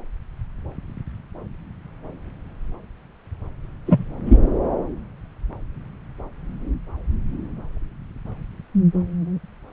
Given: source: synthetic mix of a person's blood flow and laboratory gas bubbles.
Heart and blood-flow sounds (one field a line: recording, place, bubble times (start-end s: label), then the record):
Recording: Doppler ultrasound of blood flow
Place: subclavian vein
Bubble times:
3.86-4.04 s: bubbles
4.25-4.43 s: bubbles
From the record:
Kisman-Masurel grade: 113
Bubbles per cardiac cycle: 1 to 2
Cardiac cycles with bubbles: 1 to 10%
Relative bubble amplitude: loud (0.450 to 0.775)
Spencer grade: 1 (occasional bubble signal discernible with the cardiac motion signal, with majority of cardiac periods free of bubbles)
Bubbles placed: anywhere in the cardiac cycle